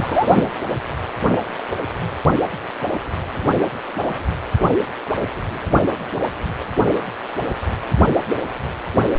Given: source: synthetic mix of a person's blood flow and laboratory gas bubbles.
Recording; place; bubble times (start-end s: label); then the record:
Doppler ultrasound of blood flow; precordium
0.00-0.42 s: bubbles
From the record:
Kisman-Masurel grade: 213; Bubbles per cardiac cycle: several, 3 to 8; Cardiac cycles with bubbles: 1 to 10%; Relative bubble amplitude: loud (0.450 to 0.775); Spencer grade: 1 (occasional bubble signal discernible with the cardiac motion signal, with majority of cardiac periods free of bubbles); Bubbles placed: only in the low amplitude regions of the cardiac cycle